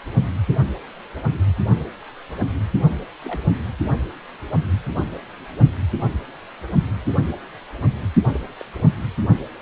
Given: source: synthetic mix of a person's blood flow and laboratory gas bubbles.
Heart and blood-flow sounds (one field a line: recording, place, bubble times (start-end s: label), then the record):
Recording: Doppler ultrasound of blood flow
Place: precordium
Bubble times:
3.23-3.43 s: bubbles
7.08-7.17 s: bubbles
8.34-8.40 s: bubbles
8.60-8.63 s: bubbles
From the record:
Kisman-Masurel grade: 121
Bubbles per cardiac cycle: 1 to 2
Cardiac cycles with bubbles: 10 to 50%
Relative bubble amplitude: barely perceptible (0.100 to 0.250)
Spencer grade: 2 (many but less than half of the cardiac periods contain bubble signals, singularly or in groups)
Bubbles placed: only in the low amplitude regions of the cardiac cycle